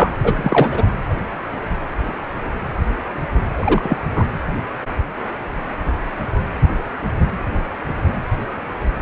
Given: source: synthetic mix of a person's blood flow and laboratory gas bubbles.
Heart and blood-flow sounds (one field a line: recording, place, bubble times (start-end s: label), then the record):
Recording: Doppler ultrasound of blood flow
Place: precordium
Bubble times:
0.00-0.84 s: bubbles
3.59-3.98 s: bubbles
4.15-4.24 s: bubbles
From the record:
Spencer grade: 2 (many but less than half of the cardiac periods contain bubble signals, singularly or in groups)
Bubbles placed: anywhere in the cardiac cycle